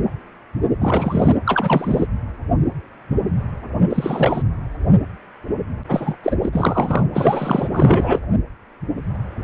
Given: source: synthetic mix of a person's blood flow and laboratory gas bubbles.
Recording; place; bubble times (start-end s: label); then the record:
Doppler ultrasound of blood flow; precordium
0.80-1.36 s: bubbles
1.46-2.06 s: bubbles
3.89-4.43 s: bubbles
5.89-6.18 s: bubbles
6.23-6.36 s: bubbles
6.42-6.50 s: bubbles
6.53-7.06 s: bubbles
7.14-7.69 s: bubbles
7.71-8.20 s: bubbles
From the record:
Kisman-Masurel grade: 333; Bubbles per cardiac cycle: rolling drumbeat, 9 or more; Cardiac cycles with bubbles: 50 to 99%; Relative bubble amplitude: loud (0.450 to 0.775); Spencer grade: 3 (all of the cardiac periods contain showers or single bubble signals, but not dominating or overriding the cardiac motion signals); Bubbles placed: anywhere in the cardiac cycle